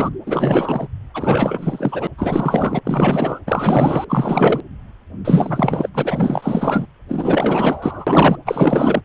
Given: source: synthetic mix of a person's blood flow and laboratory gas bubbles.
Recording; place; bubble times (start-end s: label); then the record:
Doppler ultrasound of blood flow; precordium
0.00-0.10 s: bubbles
0.26-0.88 s: bubbles
1.14-2.07 s: bubbles
2.17-2.79 s: bubbles
2.84-3.40 s: bubbles
3.46-4.04 s: bubbles
4.08-4.62 s: bubbles
5.25-5.90 s: bubbles
5.94-6.86 s: bubbles
7.08-8.37 s: bubbles
8.45-9.02 s: bubbles
From the record:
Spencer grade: 4 (maximum detectable bubble signal sounding continuously throughout systole and diastole of every cardiac period, and overriding the amplitude of the normal cardiac signals); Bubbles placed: anywhere in the cardiac cycle